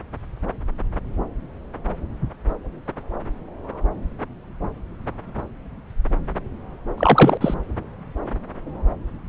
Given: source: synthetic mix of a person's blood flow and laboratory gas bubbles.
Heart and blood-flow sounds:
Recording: Doppler ultrasound of blood flow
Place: subclavian vein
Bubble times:
6.97-7.38 s: bubbles
7.40-7.54 s: bubbles
From the record:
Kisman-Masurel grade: 223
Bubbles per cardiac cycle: several, 3 to 8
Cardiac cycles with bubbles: 10 to 50%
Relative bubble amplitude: loud (0.450 to 0.775)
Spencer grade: 2 (many but less than half of the cardiac periods contain bubble signals, singularly or in groups)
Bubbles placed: anywhere in the cardiac cycle

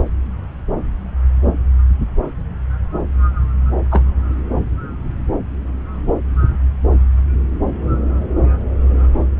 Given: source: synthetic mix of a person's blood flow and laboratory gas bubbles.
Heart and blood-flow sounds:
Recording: Doppler ultrasound of blood flow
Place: subclavian vein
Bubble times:
3.91-4.03 s: bubbles
From the record:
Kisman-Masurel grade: 112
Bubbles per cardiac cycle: 1 to 2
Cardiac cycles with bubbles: 1 to 10%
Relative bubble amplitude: moderate (0.250 to 0.450)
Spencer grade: 1 (occasional bubble signal discernible with the cardiac motion signal, with majority of cardiac periods free of bubbles)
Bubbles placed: anywhere in the cardiac cycle

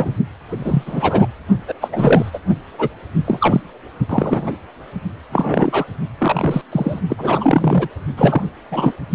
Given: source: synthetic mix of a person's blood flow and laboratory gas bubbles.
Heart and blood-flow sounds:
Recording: Doppler ultrasound of blood flow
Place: precordium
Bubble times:
0.00-0.14 s: bubbles
0.49-1.27 s: bubbles
1.68-1.74 s: bubbles
1.80-1.89 s: bubbles
1.92-2.39 s: bubbles
2.78-2.89 s: bubbles
3.24-3.61 s: bubbles
4.09-4.52 s: bubbles
5.32-5.85 s: bubbles
6.18-6.62 s: bubbles
6.71-7.00 s: bubbles
7.09-7.87 s: bubbles
8.17-8.42 s: bubbles
8.71-8.93 s: bubbles
From the record:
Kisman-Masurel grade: 243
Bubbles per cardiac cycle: several, 3 to 8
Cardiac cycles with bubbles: 100%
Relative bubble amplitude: loud (0.450 to 0.775)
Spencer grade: 3 (all of the cardiac periods contain showers or single bubble signals, but not dominating or overriding the cardiac motion signals)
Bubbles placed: only in the low amplitude regions of the cardiac cycle

